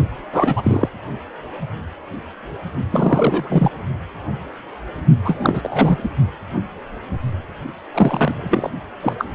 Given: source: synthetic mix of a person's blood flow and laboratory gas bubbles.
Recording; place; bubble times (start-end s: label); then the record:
Doppler ultrasound of blood flow; precordium
0.32-0.89 s: bubbles
2.91-3.69 s: bubbles
5.25-6.10 s: bubbles
7.94-8.71 s: bubbles
9.01-9.14 s: bubbles
9.18-9.25 s: bubbles
From the record:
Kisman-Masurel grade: 333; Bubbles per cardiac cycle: rolling drumbeat, 9 or more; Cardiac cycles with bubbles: 50 to 99%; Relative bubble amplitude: loud (0.450 to 0.775); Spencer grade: 3 (all of the cardiac periods contain showers or single bubble signals, but not dominating or overriding the cardiac motion signals); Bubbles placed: only in the low amplitude regions of the cardiac cycle